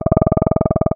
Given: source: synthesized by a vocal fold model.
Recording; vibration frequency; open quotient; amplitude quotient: sustained vowel; 20 Hz; 0.1; 1.2